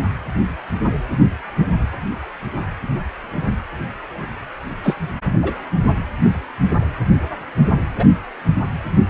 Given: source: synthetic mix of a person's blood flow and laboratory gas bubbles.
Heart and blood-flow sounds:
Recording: Doppler ultrasound of blood flow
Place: precordium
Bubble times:
4.83-4.96 s: bubbles
5.42-5.54 s: bubbles
7.98-8.05 s: bubbles
From the record:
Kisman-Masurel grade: 123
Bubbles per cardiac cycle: 1 to 2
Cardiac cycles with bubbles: 10 to 50%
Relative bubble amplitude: loud (0.450 to 0.775)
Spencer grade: 2 (many but less than half of the cardiac periods contain bubble signals, singularly or in groups)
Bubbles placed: anywhere in the cardiac cycle

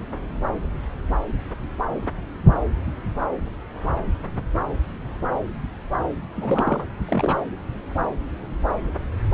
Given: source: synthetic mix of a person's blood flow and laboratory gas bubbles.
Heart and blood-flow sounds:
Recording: Doppler ultrasound of blood flow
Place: subclavian vein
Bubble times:
6.37-6.86 s: bubbles
7.08-7.38 s: bubbles
From the record:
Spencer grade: 2 (many but less than half of the cardiac periods contain bubble signals, singularly or in groups)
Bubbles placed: anywhere in the cardiac cycle

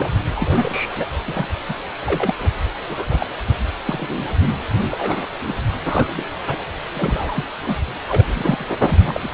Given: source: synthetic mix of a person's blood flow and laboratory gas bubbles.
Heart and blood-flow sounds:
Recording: Doppler ultrasound of blood flow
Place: precordium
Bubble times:
0.00-0.08 s: bubbles
0.35-1.05 s: bubbles
1.27-1.47 s: bubbles
1.69-1.73 s: bubbles
2.06-2.34 s: bubbles
2.38-2.52 s: bubbles
2.86-3.27 s: bubbles
3.85-4.23 s: bubbles
4.46-4.57 s: bubbles
4.91-5.28 s: bubbles
5.46-5.53 s: bubbles
5.86-6.24 s: bubbles
6.46-6.56 s: bubbles
6.93-7.45 s: bubbles
7.65-7.77 s: bubbles
8.08-8.27 s: bubbles
8.33-8.64 s: bubbles
8.82-8.97 s: bubbles
9.04-9.29 s: bubbles
From the record:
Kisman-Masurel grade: 242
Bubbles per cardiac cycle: several, 3 to 8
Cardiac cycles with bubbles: 100%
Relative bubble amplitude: moderate (0.250 to 0.450)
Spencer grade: 3 (all of the cardiac periods contain showers or single bubble signals, but not dominating or overriding the cardiac motion signals)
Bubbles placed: anywhere in the cardiac cycle

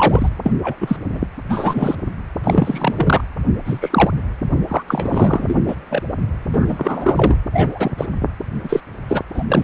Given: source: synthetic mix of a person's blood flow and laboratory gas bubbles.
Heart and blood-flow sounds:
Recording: Doppler ultrasound of blood flow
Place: precordium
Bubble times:
0.00-0.29 s: bubbles
0.45-0.53 s: bubbles
0.63-0.76 s: bubbles
0.81-0.96 s: bubbles
1.12-1.21 s: bubbles
1.49-1.96 s: bubbles
2.44-3.24 s: bubbles
3.65-4.11 s: bubbles
4.67-4.82 s: bubbles
4.88-5.58 s: bubbles
5.67-5.75 s: bubbles
5.89-6.02 s: bubbles
6.49-7.38 s: bubbles
7.53-8.06 s: bubbles
8.63-8.80 s: bubbles
9.08-9.21 s: bubbles
9.33-9.44 s: bubbles
9.48-9.64 s: bubbles
From the record:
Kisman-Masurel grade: 243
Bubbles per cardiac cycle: several, 3 to 8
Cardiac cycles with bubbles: 100%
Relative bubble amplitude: loud (0.450 to 0.775)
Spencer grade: 3 (all of the cardiac periods contain showers or single bubble signals, but not dominating or overriding the cardiac motion signals)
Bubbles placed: anywhere in the cardiac cycle

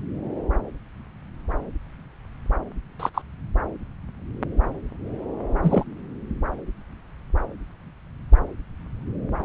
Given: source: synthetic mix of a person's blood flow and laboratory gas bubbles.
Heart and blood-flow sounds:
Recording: Doppler ultrasound of blood flow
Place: subclavian vein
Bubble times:
3.00-3.09 s: bubbles
3.14-3.21 s: bubbles
5.62-5.83 s: bubbles
From the record:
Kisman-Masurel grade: 123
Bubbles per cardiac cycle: 1 to 2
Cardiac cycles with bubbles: 10 to 50%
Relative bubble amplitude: loud (0.450 to 0.775)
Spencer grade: 2 (many but less than half of the cardiac periods contain bubble signals, singularly or in groups)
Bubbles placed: anywhere in the cardiac cycle

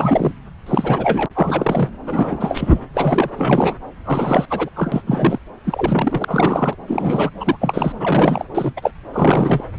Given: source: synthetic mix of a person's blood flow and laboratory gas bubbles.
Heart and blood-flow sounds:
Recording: Doppler ultrasound of blood flow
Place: subclavian vein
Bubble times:
0.00-0.33 s: bubbles
0.66-1.26 s: bubbles
1.35-1.90 s: bubbles
2.07-2.80 s: bubbles
2.94-3.30 s: bubbles
3.37-3.76 s: bubbles
4.05-4.46 s: bubbles
4.50-4.69 s: bubbles
4.75-5.02 s: bubbles
5.07-5.39 s: bubbles
5.63-6.25 s: bubbles
6.28-6.75 s: bubbles
6.88-7.30 s: bubbles
7.40-7.57 s: bubbles
7.60-7.92 s: bubbles
8.00-8.45 s: bubbles
8.54-8.73 s: bubbles
8.76-8.91 s: bubbles
9.12-9.64 s: bubbles
From the record:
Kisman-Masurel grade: 342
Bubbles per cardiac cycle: rolling drumbeat, 9 or more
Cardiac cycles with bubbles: 100%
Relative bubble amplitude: moderate (0.250 to 0.450)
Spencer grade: 3 (all of the cardiac periods contain showers or single bubble signals, but not dominating or overriding the cardiac motion signals)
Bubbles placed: anywhere in the cardiac cycle

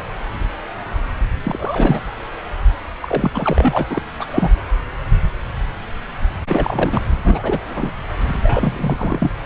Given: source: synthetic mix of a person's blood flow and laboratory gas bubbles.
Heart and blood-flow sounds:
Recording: Doppler ultrasound of blood flow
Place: subclavian vein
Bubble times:
1.45-2.01 s: bubbles
3.01-3.31 s: bubbles
3.33-3.85 s: bubbles
3.90-4.02 s: bubbles
4.18-4.51 s: bubbles
6.47-7.01 s: bubbles
7.23-7.62 s: bubbles
7.67-7.93 s: bubbles
8.43-9.33 s: bubbles
From the record:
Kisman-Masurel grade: 332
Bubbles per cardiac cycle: rolling drumbeat, 9 or more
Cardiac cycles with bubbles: 50 to 99%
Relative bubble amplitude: moderate (0.250 to 0.450)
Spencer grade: 3 (all of the cardiac periods contain showers or single bubble signals, but not dominating or overriding the cardiac motion signals)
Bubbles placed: anywhere in the cardiac cycle

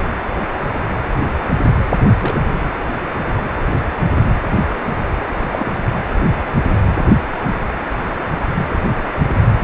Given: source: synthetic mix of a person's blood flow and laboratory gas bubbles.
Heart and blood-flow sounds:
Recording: Doppler ultrasound of blood flow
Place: precordium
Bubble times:
2.21-2.40 s: bubbles
5.52-5.71 s: bubbles
8.54-8.66 s: bubbles
From the record:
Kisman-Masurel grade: 122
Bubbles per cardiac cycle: 1 to 2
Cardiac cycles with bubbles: 10 to 50%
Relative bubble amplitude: moderate (0.250 to 0.450)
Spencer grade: 2 (many but less than half of the cardiac periods contain bubble signals, singularly or in groups)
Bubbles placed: anywhere in the cardiac cycle

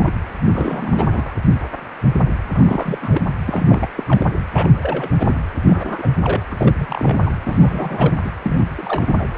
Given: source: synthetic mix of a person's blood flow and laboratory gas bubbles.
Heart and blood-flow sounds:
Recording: Doppler ultrasound of blood flow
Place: precordium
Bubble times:
0.00-0.11 s: bubbles
0.48-1.32 s: bubbles
2.52-2.98 s: bubbles
3.02-3.22 s: bubbles
3.46-3.88 s: bubbles
3.96-4.06 s: bubbles
4.08-4.26 s: bubbles
4.54-5.10 s: bubbles
5.19-5.35 s: bubbles
5.65-6.09 s: bubbles
6.24-6.42 s: bubbles
6.50-7.31 s: bubbles
7.44-8.18 s: bubbles
8.24-8.31 s: bubbles
8.44-8.65 s: bubbles
8.69-9.26 s: bubbles
From the record:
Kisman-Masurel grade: 332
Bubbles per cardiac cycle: rolling drumbeat, 9 or more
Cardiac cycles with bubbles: 50 to 99%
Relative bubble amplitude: moderate (0.250 to 0.450)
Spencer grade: 3 (all of the cardiac periods contain showers or single bubble signals, but not dominating or overriding the cardiac motion signals)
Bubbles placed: anywhere in the cardiac cycle

